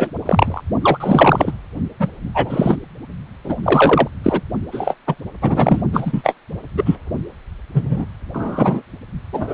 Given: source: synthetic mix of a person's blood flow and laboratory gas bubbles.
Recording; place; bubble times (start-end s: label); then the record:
Doppler ultrasound of blood flow; precordium
0.00-0.10 s: bubbles
0.26-0.61 s: bubbles
0.81-1.52 s: bubbles
1.99-2.08 s: bubbles
2.34-2.76 s: bubbles
3.44-3.56 s: bubbles
3.62-4.07 s: bubbles
4.23-4.41 s: bubbles
4.71-4.94 s: bubbles
5.06-5.15 s: bubbles
5.42-5.82 s: bubbles
5.92-6.34 s: bubbles
6.77-6.96 s: bubbles
7.73-8.05 s: bubbles
8.33-8.81 s: bubbles
9.32-9.54 s: bubbles
From the record:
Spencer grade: 3 (all of the cardiac periods contain showers or single bubble signals, but not dominating or overriding the cardiac motion signals); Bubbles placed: only in the low amplitude regions of the cardiac cycle